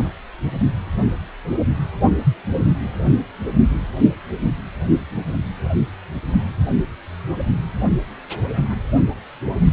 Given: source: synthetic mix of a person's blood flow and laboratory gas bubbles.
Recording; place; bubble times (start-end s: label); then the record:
Doppler ultrasound of blood flow; precordium
0.00-0.09 s: bubbles
From the record:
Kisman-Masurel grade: 112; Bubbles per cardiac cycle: 1 to 2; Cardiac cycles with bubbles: 1 to 10%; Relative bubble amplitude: moderate (0.250 to 0.450); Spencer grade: 1 (occasional bubble signal discernible with the cardiac motion signal, with majority of cardiac periods free of bubbles); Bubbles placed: only in the low amplitude regions of the cardiac cycle